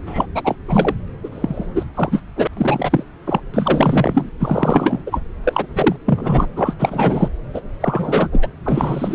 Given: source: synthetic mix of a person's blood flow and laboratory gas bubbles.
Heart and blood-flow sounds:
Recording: Doppler ultrasound of blood flow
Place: subclavian vein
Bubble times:
0.06-0.26 s: bubbles
0.34-0.56 s: bubbles
0.67-0.94 s: bubbles
1.23-1.29 s: bubbles
1.31-1.67 s: bubbles
1.75-1.84 s: bubbles
1.94-2.21 s: bubbles
2.35-2.48 s: bubbles
2.56-3.03 s: bubbles
3.26-3.41 s: bubbles
3.53-4.29 s: bubbles
4.40-5.03 s: bubbles
5.06-5.21 s: bubbles
5.43-5.67 s: bubbles
5.74-5.96 s: bubbles
6.05-6.46 s: bubbles
6.56-6.74 s: bubbles
6.79-7.29 s: bubbles
7.54-7.61 s: bubbles
7.81-8.29 s: bubbles
8.32-8.48 s: bubbles
8.65-9.14 s: bubbles
From the record:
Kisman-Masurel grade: 343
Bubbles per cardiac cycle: rolling drumbeat, 9 or more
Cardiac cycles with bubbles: 100%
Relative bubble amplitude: loud (0.450 to 0.775)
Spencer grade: 3 (all of the cardiac periods contain showers or single bubble signals, but not dominating or overriding the cardiac motion signals)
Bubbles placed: anywhere in the cardiac cycle

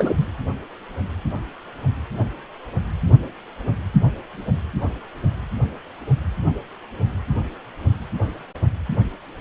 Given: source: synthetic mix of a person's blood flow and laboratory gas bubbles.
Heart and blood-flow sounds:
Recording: Doppler ultrasound of blood flow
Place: precordium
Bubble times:
0.00-0.14 s: bubbles
0.17-0.26 s: bubbles
From the record:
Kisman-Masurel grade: 213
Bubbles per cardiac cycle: several, 3 to 8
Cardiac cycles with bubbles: 1 to 10%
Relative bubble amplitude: loud (0.450 to 0.775)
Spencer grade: 1 (occasional bubble signal discernible with the cardiac motion signal, with majority of cardiac periods free of bubbles)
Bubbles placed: anywhere in the cardiac cycle

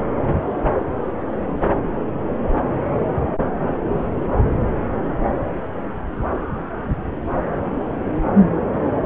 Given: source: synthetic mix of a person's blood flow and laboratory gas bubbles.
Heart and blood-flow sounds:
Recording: Doppler ultrasound of blood flow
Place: subclavian vein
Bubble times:
no bubbles
From the record:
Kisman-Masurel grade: 000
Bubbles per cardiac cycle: 0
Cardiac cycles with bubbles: 0%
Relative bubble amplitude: no bubbles discernible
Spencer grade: 0 (complete lack of bubble signals)

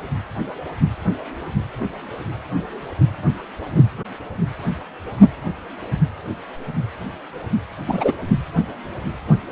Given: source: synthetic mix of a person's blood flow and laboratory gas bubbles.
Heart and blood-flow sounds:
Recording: Doppler ultrasound of blood flow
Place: precordium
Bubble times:
7.88-8.12 s: bubbles
From the record:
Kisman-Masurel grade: 113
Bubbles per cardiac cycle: 1 to 2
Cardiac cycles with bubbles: 1 to 10%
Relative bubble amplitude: loud (0.450 to 0.775)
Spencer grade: 1 (occasional bubble signal discernible with the cardiac motion signal, with majority of cardiac periods free of bubbles)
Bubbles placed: anywhere in the cardiac cycle

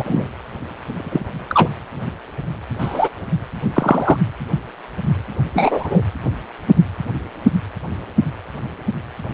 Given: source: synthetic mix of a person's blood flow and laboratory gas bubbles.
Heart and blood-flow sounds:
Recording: Doppler ultrasound of blood flow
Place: precordium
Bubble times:
0.00-0.28 s: bubbles
0.92-1.34 s: bubbles
1.49-1.69 s: bubbles
2.79-3.09 s: bubbles
3.74-4.18 s: bubbles
5.53-6.02 s: bubbles
From the record:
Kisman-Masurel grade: 123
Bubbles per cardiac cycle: 1 to 2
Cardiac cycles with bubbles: 10 to 50%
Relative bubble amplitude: loud (0.450 to 0.775)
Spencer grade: 2 (many but less than half of the cardiac periods contain bubble signals, singularly or in groups)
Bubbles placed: anywhere in the cardiac cycle

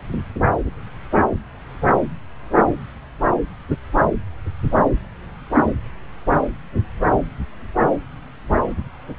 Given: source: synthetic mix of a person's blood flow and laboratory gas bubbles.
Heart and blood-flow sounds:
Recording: Doppler ultrasound of blood flow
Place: subclavian vein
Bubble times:
no bubbles
From the record:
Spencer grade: 0 (complete lack of bubble signals)

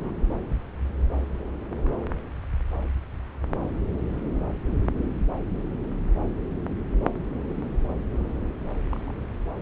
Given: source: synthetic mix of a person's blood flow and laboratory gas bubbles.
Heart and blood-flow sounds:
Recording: Doppler ultrasound of blood flow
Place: subclavian vein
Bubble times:
0.00-0.15 s: bubbles
7.54-7.69 s: bubbles
8.11-8.28 s: bubbles
8.89-9.14 s: bubbles
From the record:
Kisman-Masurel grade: 121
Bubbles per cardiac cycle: 1 to 2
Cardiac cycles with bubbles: 10 to 50%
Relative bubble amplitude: barely perceptible (0.100 to 0.250)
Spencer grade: 2 (many but less than half of the cardiac periods contain bubble signals, singularly or in groups)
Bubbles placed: anywhere in the cardiac cycle

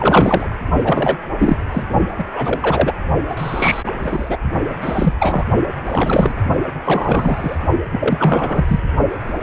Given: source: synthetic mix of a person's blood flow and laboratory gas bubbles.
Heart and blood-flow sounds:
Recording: Doppler ultrasound of blood flow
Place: precordium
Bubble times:
0.00-0.56 s: bubbles
0.84-1.19 s: bubbles
1.39-1.57 s: bubbles
1.71-1.84 s: bubbles
2.18-2.28 s: bubbles
2.33-2.93 s: bubbles
3.29-3.83 s: bubbles
3.86-3.92 s: bubbles
4.03-4.38 s: bubbles
4.80-5.13 s: bubbles
5.20-5.45 s: bubbles
5.86-6.33 s: bubbles
6.84-7.58 s: bubbles
7.92-8.64 s: bubbles
8.67-8.79 s: bubbles
9.11-9.42 s: bubbles
From the record:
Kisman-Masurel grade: 343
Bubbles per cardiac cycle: rolling drumbeat, 9 or more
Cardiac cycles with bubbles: 100%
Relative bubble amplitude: loud (0.450 to 0.775)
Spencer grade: 3 (all of the cardiac periods contain showers or single bubble signals, but not dominating or overriding the cardiac motion signals)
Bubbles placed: only in the low amplitude regions of the cardiac cycle

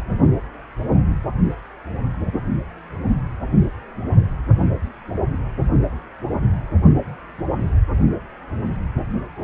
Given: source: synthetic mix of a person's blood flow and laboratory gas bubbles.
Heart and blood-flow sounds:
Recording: Doppler ultrasound of blood flow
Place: precordium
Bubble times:
no bubbles
From the record:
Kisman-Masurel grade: 000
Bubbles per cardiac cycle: 0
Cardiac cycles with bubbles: 0%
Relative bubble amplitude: no bubbles discernible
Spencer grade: 0 (complete lack of bubble signals)

